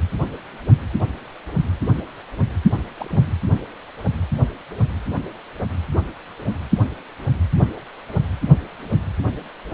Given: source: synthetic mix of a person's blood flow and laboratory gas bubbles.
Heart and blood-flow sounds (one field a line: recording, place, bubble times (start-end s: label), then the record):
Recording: Doppler ultrasound of blood flow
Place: precordium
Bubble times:
2.98-3.38 s: bubbles
From the record:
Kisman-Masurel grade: 111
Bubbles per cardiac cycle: 1 to 2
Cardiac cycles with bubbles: 1 to 10%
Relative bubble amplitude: barely perceptible (0.100 to 0.250)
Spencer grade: 1 (occasional bubble signal discernible with the cardiac motion signal, with majority of cardiac periods free of bubbles)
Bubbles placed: only in the low amplitude regions of the cardiac cycle